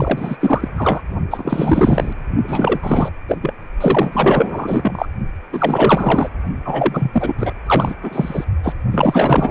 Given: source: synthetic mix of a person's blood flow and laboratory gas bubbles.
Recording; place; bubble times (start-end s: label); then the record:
Doppler ultrasound of blood flow; precordium
0.00-0.37 s: bubbles
0.40-0.68 s: bubbles
0.76-1.01 s: bubbles
1.31-2.13 s: bubbles
2.48-2.80 s: bubbles
2.82-3.10 s: bubbles
3.28-3.37 s: bubbles
3.42-3.53 s: bubbles
3.80-5.07 s: bubbles
5.53-6.29 s: bubbles
6.65-7.54 s: bubbles
7.66-7.94 s: bubbles
8.03-8.45 s: bubbles
8.63-8.74 s: bubbles
8.91-9.51 s: bubbles
From the record:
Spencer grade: 4 (maximum detectable bubble signal sounding continuously throughout systole and diastole of every cardiac period, and overriding the amplitude of the normal cardiac signals); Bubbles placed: only in the low amplitude regions of the cardiac cycle